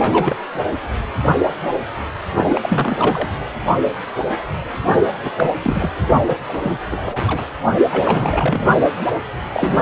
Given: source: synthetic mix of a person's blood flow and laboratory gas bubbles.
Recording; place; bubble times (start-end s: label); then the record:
Doppler ultrasound of blood flow; precordium
0.00-0.36 s: bubbles
2.35-3.27 s: bubbles
4.92-5.00 s: bubbles
5.22-5.32 s: bubbles
5.38-5.50 s: bubbles
5.64-5.93 s: bubbles
6.27-6.35 s: bubbles
6.48-6.78 s: bubbles
6.90-7.45 s: bubbles
7.91-8.69 s: bubbles
9.53-9.82 s: bubbles
From the record:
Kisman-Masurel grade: 332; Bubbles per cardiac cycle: rolling drumbeat, 9 or more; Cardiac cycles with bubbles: 50 to 99%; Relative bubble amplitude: moderate (0.250 to 0.450); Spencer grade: 3 (all of the cardiac periods contain showers or single bubble signals, but not dominating or overriding the cardiac motion signals); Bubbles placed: anywhere in the cardiac cycle